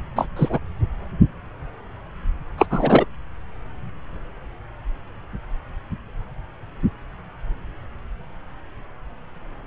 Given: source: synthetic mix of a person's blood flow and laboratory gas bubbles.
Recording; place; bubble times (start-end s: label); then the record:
Doppler ultrasound of blood flow; subclavian vein
0.15-0.28 s: bubbles
0.36-0.59 s: bubbles
2.58-2.66 s: bubbles
2.70-3.05 s: bubbles
From the record:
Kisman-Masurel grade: 223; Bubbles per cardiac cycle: several, 3 to 8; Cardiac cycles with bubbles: 10 to 50%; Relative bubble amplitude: loud (0.450 to 0.775); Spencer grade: 2 (many but less than half of the cardiac periods contain bubble signals, singularly or in groups); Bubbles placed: anywhere in the cardiac cycle